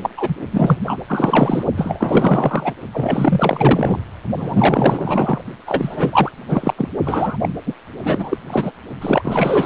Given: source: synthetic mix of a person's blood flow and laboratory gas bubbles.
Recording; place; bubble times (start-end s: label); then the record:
Doppler ultrasound of blood flow; precordium
0.00-0.10 s: bubbles
0.17-0.35 s: bubbles
0.51-0.77 s: bubbles
0.85-0.97 s: bubbles
1.08-1.64 s: bubbles
1.77-2.73 s: bubbles
2.92-3.99 s: bubbles
4.38-5.41 s: bubbles
5.67-6.32 s: bubbles
6.48-6.74 s: bubbles
6.78-6.89 s: bubbles
7.05-7.38 s: bubbles
7.42-7.49 s: bubbles
7.66-7.74 s: bubbles
8.04-8.37 s: bubbles
8.47-8.71 s: bubbles
9.01-9.66 s: bubbles
From the record:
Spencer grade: 4 (maximum detectable bubble signal sounding continuously throughout systole and diastole of every cardiac period, and overriding the amplitude of the normal cardiac signals); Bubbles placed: only in the low amplitude regions of the cardiac cycle